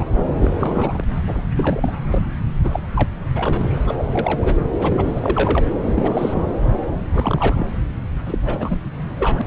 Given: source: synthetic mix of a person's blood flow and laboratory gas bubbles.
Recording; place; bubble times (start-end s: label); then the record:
Doppler ultrasound of blood flow; subclavian vein
0.00-0.09 s: bubbles
0.33-0.54 s: bubbles
0.58-1.04 s: bubbles
1.27-1.42 s: bubbles
1.55-1.93 s: bubbles
2.04-2.24 s: bubbles
2.61-2.79 s: bubbles
2.96-3.08 s: bubbles
3.35-3.70 s: bubbles
3.86-3.96 s: bubbles
3.98-4.56 s: bubbles
4.79-5.66 s: bubbles
5.83-6.52 s: bubbles
7.12-7.65 s: bubbles
8.25-8.38 s: bubbles
8.46-8.75 s: bubbles
9.19-9.41 s: bubbles
9.44-9.47 s: bubbles
From the record:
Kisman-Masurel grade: 342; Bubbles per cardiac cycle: rolling drumbeat, 9 or more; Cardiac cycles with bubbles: 100%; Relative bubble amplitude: moderate (0.250 to 0.450); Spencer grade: 3 (all of the cardiac periods contain showers or single bubble signals, but not dominating or overriding the cardiac motion signals); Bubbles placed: anywhere in the cardiac cycle